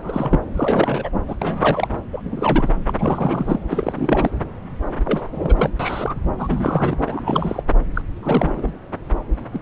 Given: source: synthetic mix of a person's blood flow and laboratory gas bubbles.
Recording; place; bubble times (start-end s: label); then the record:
Doppler ultrasound of blood flow; subclavian vein
0.00-0.40 s: bubbles
0.54-1.10 s: bubbles
1.27-1.36 s: bubbles
1.42-1.88 s: bubbles
2.12-2.71 s: bubbles
2.87-2.94 s: bubbles
2.99-3.62 s: bubbles
3.70-4.31 s: bubbles
5.05-5.28 s: bubbles
5.34-5.70 s: bubbles
5.79-6.16 s: bubbles
6.38-6.97 s: bubbles
7.07-7.62 s: bubbles
7.94-8.02 s: bubbles
8.22-8.71 s: bubbles
9.53-9.62 s: bubbles
From the record:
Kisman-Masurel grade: 332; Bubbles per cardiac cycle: rolling drumbeat, 9 or more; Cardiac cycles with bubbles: 50 to 99%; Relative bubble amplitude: moderate (0.250 to 0.450); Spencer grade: 3 (all of the cardiac periods contain showers or single bubble signals, but not dominating or overriding the cardiac motion signals); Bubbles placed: anywhere in the cardiac cycle